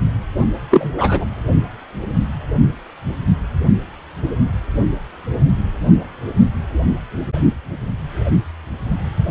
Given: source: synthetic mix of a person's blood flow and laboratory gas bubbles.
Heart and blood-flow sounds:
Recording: Doppler ultrasound of blood flow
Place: precordium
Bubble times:
0.70-1.25 s: bubbles
From the record:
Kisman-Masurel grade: 113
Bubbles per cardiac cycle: 1 to 2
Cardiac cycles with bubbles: 1 to 10%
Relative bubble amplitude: loud (0.450 to 0.775)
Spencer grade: 1 (occasional bubble signal discernible with the cardiac motion signal, with majority of cardiac periods free of bubbles)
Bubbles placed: only in the low amplitude regions of the cardiac cycle

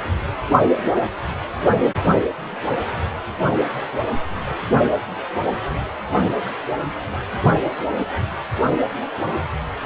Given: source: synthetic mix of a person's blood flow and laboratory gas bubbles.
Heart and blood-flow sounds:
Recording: Doppler ultrasound of blood flow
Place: precordium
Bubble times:
no bubbles
From the record:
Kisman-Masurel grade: 000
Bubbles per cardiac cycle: 0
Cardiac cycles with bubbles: 0%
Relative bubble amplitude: no bubbles discernible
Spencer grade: 0 (complete lack of bubble signals)

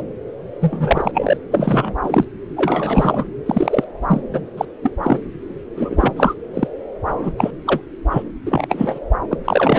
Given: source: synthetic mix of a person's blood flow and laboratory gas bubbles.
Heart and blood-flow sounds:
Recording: Doppler ultrasound of blood flow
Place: subclavian vein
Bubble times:
0.00-0.04 s: bubbles
0.60-1.37 s: bubbles
1.51-1.95 s: bubbles
2.02-2.25 s: bubbles
2.56-3.25 s: bubbles
3.46-3.84 s: bubbles
4.07-4.22 s: bubbles
4.33-4.40 s: bubbles
4.57-4.65 s: bubbles
4.83-4.91 s: bubbles
5.02-5.20 s: bubbles
5.75-6.11 s: bubbles
6.17-6.34 s: bubbles
6.54-6.67 s: bubbles
7.06-7.33 s: bubbles
7.38-7.51 s: bubbles
7.66-7.81 s: bubbles
8.11-8.23 s: bubbles
8.46-8.67 s: bubbles
8.69-9.00 s: bubbles
9.31-9.37 s: bubbles
9.45-9.79 s: bubbles
From the record:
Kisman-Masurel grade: 243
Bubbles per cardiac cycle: several, 3 to 8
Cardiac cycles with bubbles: 100%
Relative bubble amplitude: loud (0.450 to 0.775)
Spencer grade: 3 (all of the cardiac periods contain showers or single bubble signals, but not dominating or overriding the cardiac motion signals)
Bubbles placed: anywhere in the cardiac cycle

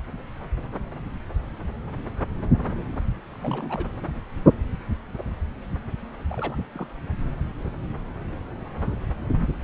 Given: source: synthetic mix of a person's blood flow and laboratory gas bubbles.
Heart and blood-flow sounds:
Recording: Doppler ultrasound of blood flow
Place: subclavian vein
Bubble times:
3.31-3.85 s: bubbles
6.30-6.57 s: bubbles
6.73-6.86 s: bubbles
From the record:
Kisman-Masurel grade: 221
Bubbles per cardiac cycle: several, 3 to 8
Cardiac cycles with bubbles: 10 to 50%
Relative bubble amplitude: barely perceptible (0.100 to 0.250)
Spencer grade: 2 (many but less than half of the cardiac periods contain bubble signals, singularly or in groups)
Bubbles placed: anywhere in the cardiac cycle

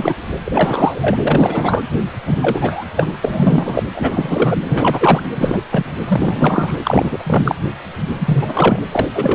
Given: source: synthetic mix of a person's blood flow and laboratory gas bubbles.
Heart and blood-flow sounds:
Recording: Doppler ultrasound of blood flow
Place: precordium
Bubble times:
0.00-0.15 s: bubbles
0.45-1.17 s: bubbles
1.24-1.85 s: bubbles
2.25-2.85 s: bubbles
2.96-3.10 s: bubbles
3.13-3.17 s: bubbles
3.22-3.83 s: bubbles
3.95-4.57 s: bubbles
4.68-5.21 s: bubbles
5.35-5.62 s: bubbles
5.71-5.86 s: bubbles
6.08-6.74 s: bubbles
6.83-7.55 s: bubbles
8.07-8.80 s: bubbles
8.91-9.06 s: bubbles
9.14-9.35 s: bubbles
From the record:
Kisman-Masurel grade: 343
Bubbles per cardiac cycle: rolling drumbeat, 9 or more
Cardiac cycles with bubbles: 100%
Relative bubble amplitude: loud (0.450 to 0.775)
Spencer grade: 3 (all of the cardiac periods contain showers or single bubble signals, but not dominating or overriding the cardiac motion signals)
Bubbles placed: anywhere in the cardiac cycle

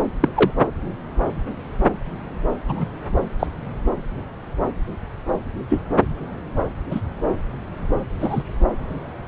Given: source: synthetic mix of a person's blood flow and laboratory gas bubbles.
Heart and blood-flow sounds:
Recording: Doppler ultrasound of blood flow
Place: subclavian vein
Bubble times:
0.20-0.29 s: bubbles
0.34-0.51 s: bubbles
2.68-2.85 s: bubbles
3.39-3.47 s: bubbles
5.69-5.81 s: bubbles
6.91-7.00 s: bubbles
8.21-8.43 s: bubbles
From the record:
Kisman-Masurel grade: 123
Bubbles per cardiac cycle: 1 to 2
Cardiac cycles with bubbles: 10 to 50%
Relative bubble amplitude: loud (0.450 to 0.775)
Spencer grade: 2 (many but less than half of the cardiac periods contain bubble signals, singularly or in groups)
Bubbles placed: anywhere in the cardiac cycle

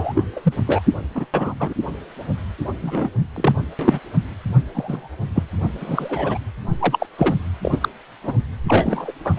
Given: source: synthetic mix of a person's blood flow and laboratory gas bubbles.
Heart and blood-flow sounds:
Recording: Doppler ultrasound of blood flow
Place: precordium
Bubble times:
0.00-0.24 s: bubbles
0.36-0.53 s: bubbles
0.67-0.82 s: bubbles
1.15-1.26 s: bubbles
1.34-1.55 s: bubbles
1.59-1.74 s: bubbles
2.81-3.10 s: bubbles
3.36-3.55 s: bubbles
3.79-4.00 s: bubbles
4.74-5.08 s: bubbles
5.34-5.44 s: bubbles
5.79-6.38 s: bubbles
6.79-7.06 s: bubbles
7.17-7.37 s: bubbles
7.63-7.88 s: bubbles
8.23-8.33 s: bubbles
8.68-9.12 s: bubbles
9.24-9.33 s: bubbles
9.36-9.39 s: bubbles
From the record:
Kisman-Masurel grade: 243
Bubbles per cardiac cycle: several, 3 to 8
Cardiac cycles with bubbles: 100%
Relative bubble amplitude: loud (0.450 to 0.775)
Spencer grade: 3 (all of the cardiac periods contain showers or single bubble signals, but not dominating or overriding the cardiac motion signals)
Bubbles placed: anywhere in the cardiac cycle

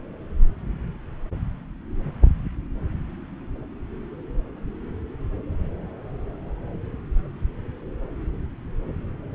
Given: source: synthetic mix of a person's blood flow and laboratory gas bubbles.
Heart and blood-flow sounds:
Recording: Doppler ultrasound of blood flow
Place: subclavian vein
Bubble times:
no bubbles
From the record:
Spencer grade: 0 (complete lack of bubble signals)

